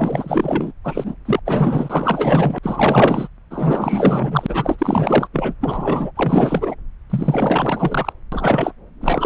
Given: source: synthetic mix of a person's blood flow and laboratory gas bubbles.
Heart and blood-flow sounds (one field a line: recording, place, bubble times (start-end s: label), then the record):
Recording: Doppler ultrasound of blood flow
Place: subclavian vein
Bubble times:
0.00-0.73 s: bubbles
0.84-1.17 s: bubbles
1.25-1.40 s: bubbles
1.46-2.58 s: bubbles
2.63-3.27 s: bubbles
3.50-5.27 s: bubbles
5.33-5.54 s: bubbles
5.60-6.11 s: bubbles
6.16-6.75 s: bubbles
7.09-8.12 s: bubbles
8.32-8.73 s: bubbles
9.01-9.26 s: bubbles
From the record:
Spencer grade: 4 (maximum detectable bubble signal sounding continuously throughout systole and diastole of every cardiac period, and overriding the amplitude of the normal cardiac signals)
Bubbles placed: anywhere in the cardiac cycle